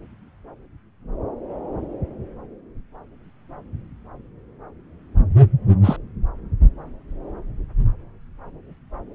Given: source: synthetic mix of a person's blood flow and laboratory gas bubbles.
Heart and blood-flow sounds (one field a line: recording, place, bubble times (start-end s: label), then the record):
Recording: Doppler ultrasound of blood flow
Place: subclavian vein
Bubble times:
5.83-5.96 s: bubbles
From the record:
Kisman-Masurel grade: 113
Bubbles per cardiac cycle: 1 to 2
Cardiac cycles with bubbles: 1 to 10%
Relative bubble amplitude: loud (0.450 to 0.775)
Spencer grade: 1 (occasional bubble signal discernible with the cardiac motion signal, with majority of cardiac periods free of bubbles)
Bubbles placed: anywhere in the cardiac cycle